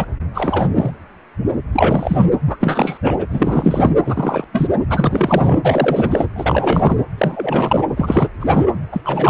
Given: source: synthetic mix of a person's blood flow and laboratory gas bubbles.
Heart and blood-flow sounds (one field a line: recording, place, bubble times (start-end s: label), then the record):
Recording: Doppler ultrasound of blood flow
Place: precordium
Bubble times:
0.00-0.05 s: bubbles
0.35-0.71 s: bubbles
0.75-0.91 s: bubbles
1.73-2.26 s: bubbles
2.46-2.56 s: bubbles
2.59-2.98 s: bubbles
3.02-3.26 s: bubbles
3.30-3.91 s: bubbles
4.04-4.45 s: bubbles
4.52-4.67 s: bubbles
4.89-5.60 s: bubbles
5.64-6.26 s: bubbles
6.36-6.97 s: bubbles
7.17-7.85 s: bubbles
7.96-8.29 s: bubbles
8.40-8.63 s: bubbles
8.91-9.01 s: bubbles
9.04-9.30 s: bubbles
From the record:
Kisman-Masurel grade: 333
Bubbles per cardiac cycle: rolling drumbeat, 9 or more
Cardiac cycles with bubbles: 50 to 99%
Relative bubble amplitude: loud (0.450 to 0.775)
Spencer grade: 3 (all of the cardiac periods contain showers or single bubble signals, but not dominating or overriding the cardiac motion signals)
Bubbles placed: anywhere in the cardiac cycle